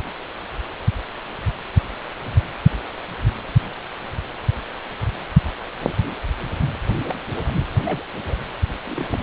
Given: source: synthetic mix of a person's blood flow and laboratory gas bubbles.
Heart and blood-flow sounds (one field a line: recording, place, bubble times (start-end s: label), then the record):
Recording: Doppler ultrasound of blood flow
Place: precordium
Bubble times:
7.06-7.15 s: bubbles
7.45-7.54 s: bubbles
7.85-8.05 s: bubbles
8.15-8.35 s: bubbles
8.87-9.19 s: bubbles
From the record:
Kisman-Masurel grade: 121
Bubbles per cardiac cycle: 1 to 2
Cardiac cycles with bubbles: 10 to 50%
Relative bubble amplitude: barely perceptible (0.100 to 0.250)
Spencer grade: 2 (many but less than half of the cardiac periods contain bubble signals, singularly or in groups)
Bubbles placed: anywhere in the cardiac cycle